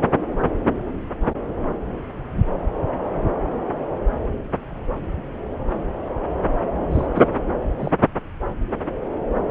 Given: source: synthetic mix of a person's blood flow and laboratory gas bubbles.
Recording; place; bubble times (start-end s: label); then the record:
Doppler ultrasound of blood flow; subclavian vein
6.91-7.07 s: bubbles
7.15-7.23 s: bubbles
7.78-7.91 s: bubbles
From the record:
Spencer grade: 1 (occasional bubble signal discernible with the cardiac motion signal, with majority of cardiac periods free of bubbles); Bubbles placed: anywhere in the cardiac cycle